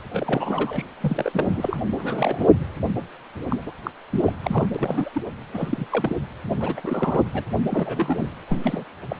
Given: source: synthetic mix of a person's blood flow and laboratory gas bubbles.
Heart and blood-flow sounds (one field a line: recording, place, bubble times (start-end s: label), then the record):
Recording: Doppler ultrasound of blood flow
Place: precordium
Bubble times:
0.15-0.85 s: bubbles
1.01-1.77 s: bubbles
1.97-2.50 s: bubbles
2.59-2.66 s: bubbles
3.50-3.62 s: bubbles
3.66-3.73 s: bubbles
3.83-3.91 s: bubbles
4.10-4.23 s: bubbles
4.25-4.33 s: bubbles
4.44-4.68 s: bubbles
4.75-5.12 s: bubbles
5.14-5.23 s: bubbles
5.54-6.16 s: bubbles
6.50-7.23 s: bubbles
7.33-7.44 s: bubbles
7.69-8.31 s: bubbles
8.48-8.84 s: bubbles
9.08-9.16 s: bubbles
From the record:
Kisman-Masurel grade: 342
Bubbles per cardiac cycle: rolling drumbeat, 9 or more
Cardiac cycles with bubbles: 100%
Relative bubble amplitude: moderate (0.250 to 0.450)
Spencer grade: 3 (all of the cardiac periods contain showers or single bubble signals, but not dominating or overriding the cardiac motion signals)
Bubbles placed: anywhere in the cardiac cycle